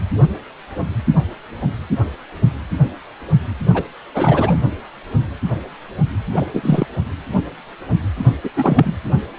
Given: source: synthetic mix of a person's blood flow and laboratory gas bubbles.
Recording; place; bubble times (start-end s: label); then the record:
Doppler ultrasound of blood flow; precordium
3.73-3.83 s: bubbles
4.14-4.60 s: bubbles
6.32-6.46 s: bubbles
6.54-6.87 s: bubbles
8.43-8.51 s: bubbles
8.55-8.92 s: bubbles
From the record:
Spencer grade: 2 (many but less than half of the cardiac periods contain bubble signals, singularly or in groups); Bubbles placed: anywhere in the cardiac cycle